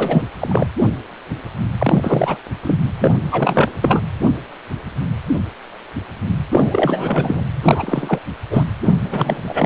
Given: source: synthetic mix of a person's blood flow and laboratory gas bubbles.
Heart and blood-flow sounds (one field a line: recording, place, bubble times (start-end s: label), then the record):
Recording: Doppler ultrasound of blood flow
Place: precordium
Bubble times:
0.00-0.24 s: bubbles
0.40-0.72 s: bubbles
1.78-2.37 s: bubbles
2.62-2.79 s: bubbles
2.99-3.14 s: bubbles
3.21-3.70 s: bubbles
3.81-4.00 s: bubbles
6.51-7.45 s: bubbles
7.63-8.19 s: bubbles
8.50-8.63 s: bubbles
8.81-8.93 s: bubbles
9.03-9.43 s: bubbles
9.46-9.66 s: bubbles
From the record:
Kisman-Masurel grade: 333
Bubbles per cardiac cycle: rolling drumbeat, 9 or more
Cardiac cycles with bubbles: 50 to 99%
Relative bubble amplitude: loud (0.450 to 0.775)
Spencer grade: 3 (all of the cardiac periods contain showers or single bubble signals, but not dominating or overriding the cardiac motion signals)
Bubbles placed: anywhere in the cardiac cycle